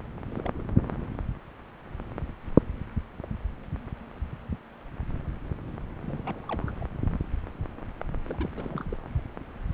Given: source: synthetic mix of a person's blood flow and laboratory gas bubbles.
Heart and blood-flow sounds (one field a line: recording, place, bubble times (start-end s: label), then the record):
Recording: Doppler ultrasound of blood flow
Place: subclavian vein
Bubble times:
0.30-0.63 s: bubbles
0.72-0.85 s: bubbles
6.01-6.40 s: bubbles
6.48-6.63 s: bubbles
6.67-6.74 s: bubbles
6.80-6.86 s: bubbles
8.26-8.50 s: bubbles
8.56-8.96 s: bubbles
From the record:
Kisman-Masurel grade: 221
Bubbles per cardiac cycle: several, 3 to 8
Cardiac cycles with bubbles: 10 to 50%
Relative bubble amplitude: barely perceptible (0.100 to 0.250)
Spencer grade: 2 (many but less than half of the cardiac periods contain bubble signals, singularly or in groups)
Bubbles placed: anywhere in the cardiac cycle